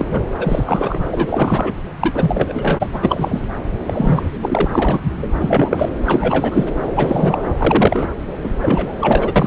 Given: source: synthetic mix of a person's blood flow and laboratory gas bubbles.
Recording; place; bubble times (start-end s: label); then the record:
Doppler ultrasound of blood flow; subclavian vein
0.00-0.27 s: bubbles
0.38-1.75 s: bubbles
2.00-3.48 s: bubbles
3.86-4.29 s: bubbles
4.42-4.67 s: bubbles
4.71-5.00 s: bubbles
5.21-5.28 s: bubbles
5.39-5.89 s: bubbles
6.06-6.69 s: bubbles
6.95-7.53 s: bubbles
7.57-8.10 s: bubbles
8.44-8.49 s: bubbles
8.62-8.95 s: bubbles
9.01-9.32 s: bubbles
9.36-9.47 s: bubbles
From the record:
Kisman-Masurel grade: 343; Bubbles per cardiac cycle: rolling drumbeat, 9 or more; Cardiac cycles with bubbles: 100%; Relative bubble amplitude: loud (0.450 to 0.775); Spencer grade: 3 (all of the cardiac periods contain showers or single bubble signals, but not dominating or overriding the cardiac motion signals); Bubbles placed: anywhere in the cardiac cycle